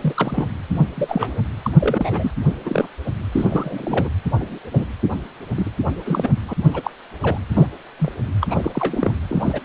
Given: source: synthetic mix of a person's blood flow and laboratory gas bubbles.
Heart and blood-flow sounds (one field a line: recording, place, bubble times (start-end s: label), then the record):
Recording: Doppler ultrasound of blood flow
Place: precordium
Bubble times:
0.01-0.14 s: bubbles
0.16-0.47 s: bubbles
0.73-0.84 s: bubbles
0.96-1.38 s: bubbles
1.64-1.71 s: bubbles
1.77-2.31 s: bubbles
2.65-2.87 s: bubbles
3.31-4.09 s: bubbles
4.39-4.58 s: bubbles
4.73-4.86 s: bubbles
5.56-5.71 s: bubbles
6.05-6.31 s: bubbles
6.48-6.54 s: bubbles
6.67-6.91 s: bubbles
7.22-7.38 s: bubbles
7.53-7.67 s: bubbles
7.99-8.12 s: bubbles
8.41-9.12 s: bubbles
9.29-9.60 s: bubbles
From the record:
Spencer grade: 3 (all of the cardiac periods contain showers or single bubble signals, but not dominating or overriding the cardiac motion signals)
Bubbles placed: anywhere in the cardiac cycle